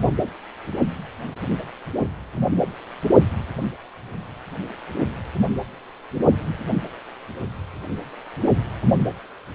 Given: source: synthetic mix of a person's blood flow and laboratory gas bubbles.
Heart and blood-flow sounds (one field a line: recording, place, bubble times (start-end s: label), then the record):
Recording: Doppler ultrasound of blood flow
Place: precordium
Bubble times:
no bubbles
From the record:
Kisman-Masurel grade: 000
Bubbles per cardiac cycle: 0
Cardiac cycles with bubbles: 0%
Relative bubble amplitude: no bubbles discernible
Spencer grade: 0 (complete lack of bubble signals)